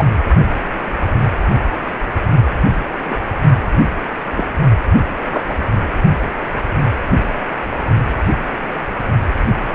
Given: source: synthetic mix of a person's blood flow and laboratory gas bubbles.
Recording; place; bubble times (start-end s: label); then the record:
Doppler ultrasound of blood flow; precordium
0.00-0.05 s: bubbles
3.04-3.19 s: bubbles
4.38-4.45 s: bubbles
5.29-5.43 s: bubbles
5.47-5.53 s: bubbles
From the record:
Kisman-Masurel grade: 122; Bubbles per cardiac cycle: 1 to 2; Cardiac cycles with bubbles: 10 to 50%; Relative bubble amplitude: moderate (0.250 to 0.450); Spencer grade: 2 (many but less than half of the cardiac periods contain bubble signals, singularly or in groups); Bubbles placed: only in the low amplitude regions of the cardiac cycle